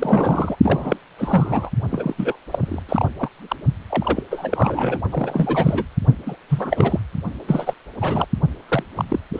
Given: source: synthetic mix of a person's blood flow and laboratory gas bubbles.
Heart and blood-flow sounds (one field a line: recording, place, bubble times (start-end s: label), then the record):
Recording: Doppler ultrasound of blood flow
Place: precordium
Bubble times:
0.00-0.56 s: bubbles
0.63-0.96 s: bubbles
1.18-1.70 s: bubbles
1.90-2.36 s: bubbles
2.50-2.83 s: bubbles
2.89-3.08 s: bubbles
3.18-3.29 s: bubbles
3.48-3.56 s: bubbles
3.89-4.23 s: bubbles
4.30-5.02 s: bubbles
5.09-5.83 s: bubbles
6.25-6.36 s: bubbles
6.49-6.99 s: bubbles
7.47-7.74 s: bubbles
8.00-8.26 s: bubbles
8.68-8.83 s: bubbles
8.95-9.04 s: bubbles
9.10-9.20 s: bubbles
9.33-9.40 s: bubbles
From the record:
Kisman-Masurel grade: 343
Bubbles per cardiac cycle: rolling drumbeat, 9 or more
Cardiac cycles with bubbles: 100%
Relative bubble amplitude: loud (0.450 to 0.775)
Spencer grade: 3 (all of the cardiac periods contain showers or single bubble signals, but not dominating or overriding the cardiac motion signals)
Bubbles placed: only in the low amplitude regions of the cardiac cycle